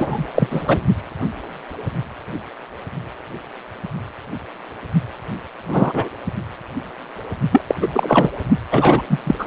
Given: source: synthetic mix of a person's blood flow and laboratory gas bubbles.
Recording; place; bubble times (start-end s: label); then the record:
Doppler ultrasound of blood flow; precordium
0.00-0.28 s: bubbles
0.34-0.80 s: bubbles
5.68-6.08 s: bubbles
7.51-7.61 s: bubbles
7.67-7.75 s: bubbles
7.81-8.30 s: bubbles
8.71-9.01 s: bubbles
9.09-9.18 s: bubbles
9.24-9.35 s: bubbles
9.38-9.46 s: bubbles
From the record:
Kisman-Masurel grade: 223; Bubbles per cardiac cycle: several, 3 to 8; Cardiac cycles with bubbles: 10 to 50%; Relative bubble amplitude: loud (0.450 to 0.775); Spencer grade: 2 (many but less than half of the cardiac periods contain bubble signals, singularly or in groups); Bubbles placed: only in the low amplitude regions of the cardiac cycle